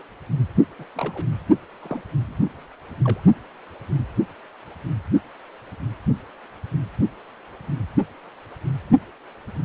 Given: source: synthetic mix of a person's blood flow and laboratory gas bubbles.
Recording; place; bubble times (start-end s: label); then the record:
Doppler ultrasound of blood flow; precordium
0.79-0.83 s: bubbles
0.95-1.26 s: bubbles
1.82-2.01 s: bubbles
2.28-2.65 s: bubbles
3.04-3.20 s: bubbles
From the record:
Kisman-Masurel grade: 221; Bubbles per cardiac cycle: several, 3 to 8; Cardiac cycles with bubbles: 10 to 50%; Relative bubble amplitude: barely perceptible (0.100 to 0.250); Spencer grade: 2 (many but less than half of the cardiac periods contain bubble signals, singularly or in groups); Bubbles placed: only in the low amplitude regions of the cardiac cycle